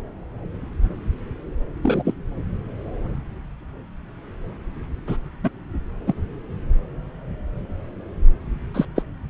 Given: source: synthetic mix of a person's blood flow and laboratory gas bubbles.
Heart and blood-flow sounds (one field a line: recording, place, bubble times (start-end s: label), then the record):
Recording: Doppler ultrasound of blood flow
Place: subclavian vein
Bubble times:
1.82-2.14 s: bubbles
5.07-5.17 s: bubbles
5.43-5.50 s: bubbles
6.07-6.14 s: bubbles
8.73-8.85 s: bubbles
8.96-9.02 s: bubbles
From the record:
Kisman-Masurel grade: 122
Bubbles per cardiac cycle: 1 to 2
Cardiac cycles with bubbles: 10 to 50%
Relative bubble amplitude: moderate (0.250 to 0.450)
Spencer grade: 2 (many but less than half of the cardiac periods contain bubble signals, singularly or in groups)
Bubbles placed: anywhere in the cardiac cycle